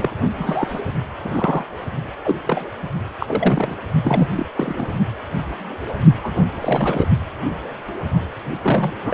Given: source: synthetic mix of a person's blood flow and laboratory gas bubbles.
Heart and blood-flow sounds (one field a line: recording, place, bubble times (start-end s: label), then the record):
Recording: Doppler ultrasound of blood flow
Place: precordium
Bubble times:
0.00-0.10 s: bubbles
0.34-0.81 s: bubbles
1.23-1.64 s: bubbles
2.24-2.36 s: bubbles
2.47-2.70 s: bubbles
3.20-3.76 s: bubbles
4.04-4.28 s: bubbles
4.36-4.46 s: bubbles
4.55-4.86 s: bubbles
6.23-6.41 s: bubbles
6.60-7.09 s: bubbles
8.61-8.93 s: bubbles
9.03-9.14 s: bubbles
From the record:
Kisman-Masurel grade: 232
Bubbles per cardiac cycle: several, 3 to 8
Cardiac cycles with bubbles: 50 to 99%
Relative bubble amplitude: moderate (0.250 to 0.450)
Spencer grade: 3 (all of the cardiac periods contain showers or single bubble signals, but not dominating or overriding the cardiac motion signals)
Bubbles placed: only in the low amplitude regions of the cardiac cycle